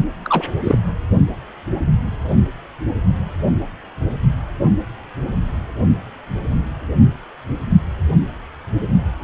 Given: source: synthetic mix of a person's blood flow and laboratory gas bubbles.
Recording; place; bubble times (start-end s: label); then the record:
Doppler ultrasound of blood flow; precordium
0.25-0.43 s: bubbles
0.63-0.78 s: bubbles
From the record:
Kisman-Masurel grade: 123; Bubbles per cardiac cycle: 1 to 2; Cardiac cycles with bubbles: 10 to 50%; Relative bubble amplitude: loud (0.450 to 0.775); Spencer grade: 2 (many but less than half of the cardiac periods contain bubble signals, singularly or in groups); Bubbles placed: only in the low amplitude regions of the cardiac cycle